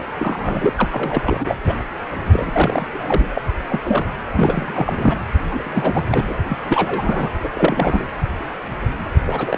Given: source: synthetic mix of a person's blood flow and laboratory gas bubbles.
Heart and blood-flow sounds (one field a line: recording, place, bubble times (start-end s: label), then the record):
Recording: Doppler ultrasound of blood flow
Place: precordium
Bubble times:
0.00-0.02 s: bubbles
0.19-0.73 s: bubbles
0.77-0.89 s: bubbles
0.92-1.58 s: bubbles
1.66-1.74 s: bubbles
2.25-2.87 s: bubbles
2.93-3.42 s: bubbles
3.70-3.79 s: bubbles
3.83-4.06 s: bubbles
4.36-5.19 s: bubbles
5.50-6.04 s: bubbles
6.11-6.24 s: bubbles
6.27-6.34 s: bubbles
6.48-6.59 s: bubbles
6.69-7.28 s: bubbles
7.42-7.49 s: bubbles
7.55-8.06 s: bubbles
9.27-9.58 s: bubbles
From the record:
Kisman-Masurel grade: 332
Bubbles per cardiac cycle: rolling drumbeat, 9 or more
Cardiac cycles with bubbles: 50 to 99%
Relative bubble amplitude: moderate (0.250 to 0.450)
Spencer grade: 3 (all of the cardiac periods contain showers or single bubble signals, but not dominating or overriding the cardiac motion signals)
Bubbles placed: anywhere in the cardiac cycle